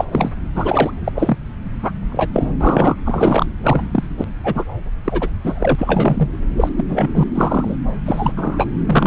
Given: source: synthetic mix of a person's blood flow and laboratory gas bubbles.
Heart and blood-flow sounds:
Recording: Doppler ultrasound of blood flow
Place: subclavian vein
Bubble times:
0.00-0.06 s: bubbles
0.11-0.31 s: bubbles
0.54-0.91 s: bubbles
1.04-1.10 s: bubbles
1.15-1.37 s: bubbles
1.83-1.92 s: bubbles
2.12-2.30 s: bubbles
2.33-2.48 s: bubbles
2.60-2.96 s: bubbles
3.05-3.46 s: bubbles
3.63-4.25 s: bubbles
4.43-4.64 s: bubbles
5.04-5.29 s: bubbles
5.43-5.75 s: bubbles
5.78-6.29 s: bubbles
6.56-6.69 s: bubbles
6.76-6.84 s: bubbles
6.88-7.08 s: bubbles
7.13-7.24 s: bubbles
7.34-7.75 s: bubbles
8.05-8.32 s: bubbles
8.36-8.69 s: bubbles
8.86-9.07 s: bubbles
From the record:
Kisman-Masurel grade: 243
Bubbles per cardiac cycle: several, 3 to 8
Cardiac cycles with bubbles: 100%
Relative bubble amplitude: loud (0.450 to 0.775)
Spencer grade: 3 (all of the cardiac periods contain showers or single bubble signals, but not dominating or overriding the cardiac motion signals)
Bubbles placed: anywhere in the cardiac cycle

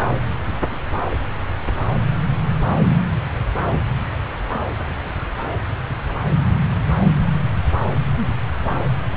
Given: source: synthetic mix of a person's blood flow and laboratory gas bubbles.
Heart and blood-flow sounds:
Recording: Doppler ultrasound of blood flow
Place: subclavian vein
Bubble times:
no bubbles
From the record:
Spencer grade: 0 (complete lack of bubble signals)

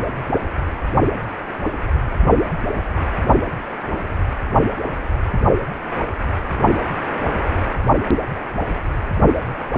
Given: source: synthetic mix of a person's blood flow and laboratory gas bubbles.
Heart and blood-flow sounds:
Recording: Doppler ultrasound of blood flow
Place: precordium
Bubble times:
no bubbles
From the record:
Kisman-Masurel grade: 000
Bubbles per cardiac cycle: 0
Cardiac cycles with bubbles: 0%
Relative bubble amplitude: no bubbles discernible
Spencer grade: 0 (complete lack of bubble signals)

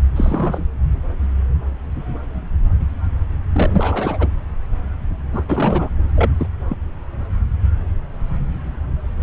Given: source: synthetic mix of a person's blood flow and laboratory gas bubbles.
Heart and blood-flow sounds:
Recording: Doppler ultrasound of blood flow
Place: subclavian vein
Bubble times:
0.16-0.61 s: bubbles
3.52-4.27 s: bubbles
5.33-5.43 s: bubbles
5.48-5.91 s: bubbles
6.16-6.30 s: bubbles
6.38-6.47 s: bubbles
6.69-6.76 s: bubbles
From the record:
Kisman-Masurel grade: 222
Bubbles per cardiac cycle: several, 3 to 8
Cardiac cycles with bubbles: 10 to 50%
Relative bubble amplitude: moderate (0.250 to 0.450)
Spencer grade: 2 (many but less than half of the cardiac periods contain bubble signals, singularly or in groups)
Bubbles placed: anywhere in the cardiac cycle

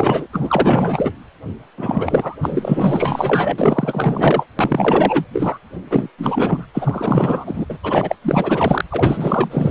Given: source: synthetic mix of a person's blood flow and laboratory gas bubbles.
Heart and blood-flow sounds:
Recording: Doppler ultrasound of blood flow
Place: precordium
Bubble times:
0.00-0.28 s: bubbles
0.32-1.11 s: bubbles
1.77-2.36 s: bubbles
2.42-4.46 s: bubbles
4.59-5.25 s: bubbles
5.33-5.58 s: bubbles
5.91-6.10 s: bubbles
6.18-6.66 s: bubbles
6.74-7.66 s: bubbles
7.69-7.78 s: bubbles
7.83-8.15 s: bubbles
8.22-8.85 s: bubbles
8.90-9.71 s: bubbles
From the record:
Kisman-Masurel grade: 444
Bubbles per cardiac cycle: continuous sound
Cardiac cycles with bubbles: 100%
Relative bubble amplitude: maximal (0.775 to 0.999)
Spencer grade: 4 (maximum detectable bubble signal sounding continuously throughout systole and diastole of every cardiac period, and overriding the amplitude of the normal cardiac signals)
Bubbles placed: anywhere in the cardiac cycle

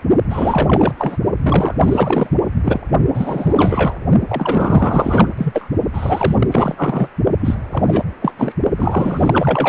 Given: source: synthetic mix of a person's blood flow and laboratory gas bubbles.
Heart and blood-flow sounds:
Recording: Doppler ultrasound of blood flow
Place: precordium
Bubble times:
0.29-0.93 s: bubbles
0.98-1.17 s: bubbles
1.44-1.75 s: bubbles
1.80-2.33 s: bubbles
2.63-2.80 s: bubbles
3.14-3.96 s: bubbles
4.27-5.28 s: bubbles
5.37-5.68 s: bubbles
5.93-6.36 s: bubbles
6.38-6.47 s: bubbles
6.50-7.08 s: bubbles
7.40-7.55 s: bubbles
7.71-7.83 s: bubbles
7.87-8.04 s: bubbles
8.21-8.34 s: bubbles
8.38-8.53 s: bubbles
8.77-9.69 s: bubbles
From the record:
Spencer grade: 4 (maximum detectable bubble signal sounding continuously throughout systole and diastole of every cardiac period, and overriding the amplitude of the normal cardiac signals)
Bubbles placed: only in the low amplitude regions of the cardiac cycle

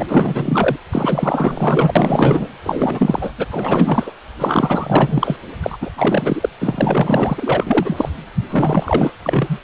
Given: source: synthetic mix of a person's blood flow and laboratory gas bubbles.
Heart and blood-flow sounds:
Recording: Doppler ultrasound of blood flow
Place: precordium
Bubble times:
0.00-0.77 s: bubbles
0.92-2.48 s: bubbles
2.63-3.32 s: bubbles
3.38-3.46 s: bubbles
3.51-4.12 s: bubbles
4.38-5.37 s: bubbles
5.62-5.77 s: bubbles
5.81-5.90 s: bubbles
5.97-6.49 s: bubbles
6.61-8.09 s: bubbles
8.48-9.12 s: bubbles
9.22-9.60 s: bubbles
From the record:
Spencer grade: 4 (maximum detectable bubble signal sounding continuously throughout systole and diastole of every cardiac period, and overriding the amplitude of the normal cardiac signals)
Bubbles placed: anywhere in the cardiac cycle

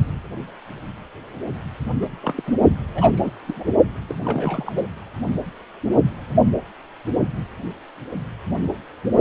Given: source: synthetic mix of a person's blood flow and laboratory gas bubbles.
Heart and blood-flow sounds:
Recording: Doppler ultrasound of blood flow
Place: precordium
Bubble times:
2.02-2.06 s: bubbles
2.22-2.43 s: bubbles
2.47-2.56 s: bubbles
2.94-3.31 s: bubbles
3.46-3.64 s: bubbles
4.08-4.88 s: bubbles
From the record:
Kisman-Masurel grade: 221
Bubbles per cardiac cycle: several, 3 to 8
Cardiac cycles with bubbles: 10 to 50%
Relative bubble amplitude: barely perceptible (0.100 to 0.250)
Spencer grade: 2 (many but less than half of the cardiac periods contain bubble signals, singularly or in groups)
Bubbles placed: only in the low amplitude regions of the cardiac cycle

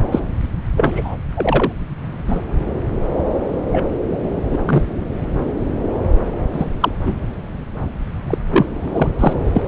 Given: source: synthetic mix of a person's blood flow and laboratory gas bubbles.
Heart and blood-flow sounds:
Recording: Doppler ultrasound of blood flow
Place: subclavian vein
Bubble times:
0.12-0.20 s: bubbles
0.77-1.18 s: bubbles
1.35-1.73 s: bubbles
2.26-2.42 s: bubbles
3.72-3.85 s: bubbles
4.50-4.58 s: bubbles
4.65-4.83 s: bubbles
6.52-6.66 s: bubbles
6.80-6.92 s: bubbles
7.04-7.14 s: bubbles
8.27-8.38 s: bubbles
8.50-8.66 s: bubbles
8.80-9.10 s: bubbles
9.19-9.33 s: bubbles
9.52-9.68 s: bubbles
From the record:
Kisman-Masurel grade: 233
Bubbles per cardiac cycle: several, 3 to 8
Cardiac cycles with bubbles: 50 to 99%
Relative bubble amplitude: loud (0.450 to 0.775)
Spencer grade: 3 (all of the cardiac periods contain showers or single bubble signals, but not dominating or overriding the cardiac motion signals)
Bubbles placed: anywhere in the cardiac cycle

